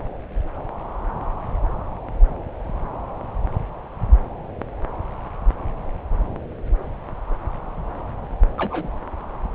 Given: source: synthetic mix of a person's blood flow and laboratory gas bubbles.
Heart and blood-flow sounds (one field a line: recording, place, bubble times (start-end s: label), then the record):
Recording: Doppler ultrasound of blood flow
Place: subclavian vein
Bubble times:
8.58-8.91 s: bubbles
From the record:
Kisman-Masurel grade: 112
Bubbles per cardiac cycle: 1 to 2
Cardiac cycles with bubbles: 1 to 10%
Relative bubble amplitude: moderate (0.250 to 0.450)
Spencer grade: 1 (occasional bubble signal discernible with the cardiac motion signal, with majority of cardiac periods free of bubbles)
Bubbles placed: anywhere in the cardiac cycle